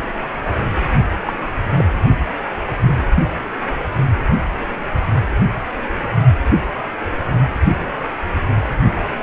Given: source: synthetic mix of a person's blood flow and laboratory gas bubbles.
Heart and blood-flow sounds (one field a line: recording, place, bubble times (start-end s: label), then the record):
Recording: Doppler ultrasound of blood flow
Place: precordium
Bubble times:
1.26-1.33 s: bubbles
1.76-1.84 s: bubbles
From the record:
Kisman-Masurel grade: 112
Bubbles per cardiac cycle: 1 to 2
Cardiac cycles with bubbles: 1 to 10%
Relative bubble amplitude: moderate (0.250 to 0.450)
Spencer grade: 1 (occasional bubble signal discernible with the cardiac motion signal, with majority of cardiac periods free of bubbles)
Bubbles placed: only in the low amplitude regions of the cardiac cycle